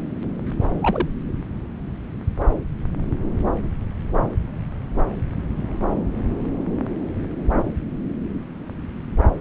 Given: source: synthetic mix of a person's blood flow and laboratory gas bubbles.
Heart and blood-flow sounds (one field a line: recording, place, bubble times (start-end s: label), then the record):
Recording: Doppler ultrasound of blood flow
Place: subclavian vein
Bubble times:
0.80-1.08 s: bubbles
From the record:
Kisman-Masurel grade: 112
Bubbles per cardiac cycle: 1 to 2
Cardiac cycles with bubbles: 1 to 10%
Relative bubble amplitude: moderate (0.250 to 0.450)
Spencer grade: 1 (occasional bubble signal discernible with the cardiac motion signal, with majority of cardiac periods free of bubbles)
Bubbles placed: anywhere in the cardiac cycle